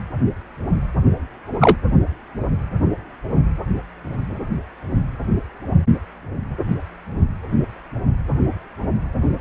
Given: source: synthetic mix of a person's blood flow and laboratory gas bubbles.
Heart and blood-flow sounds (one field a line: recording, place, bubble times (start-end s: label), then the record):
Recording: Doppler ultrasound of blood flow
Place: precordium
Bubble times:
1.60-1.76 s: bubbles
From the record:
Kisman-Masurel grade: 113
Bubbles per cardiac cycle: 1 to 2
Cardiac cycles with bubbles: 1 to 10%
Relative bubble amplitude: loud (0.450 to 0.775)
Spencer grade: 1 (occasional bubble signal discernible with the cardiac motion signal, with majority of cardiac periods free of bubbles)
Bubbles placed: only in the low amplitude regions of the cardiac cycle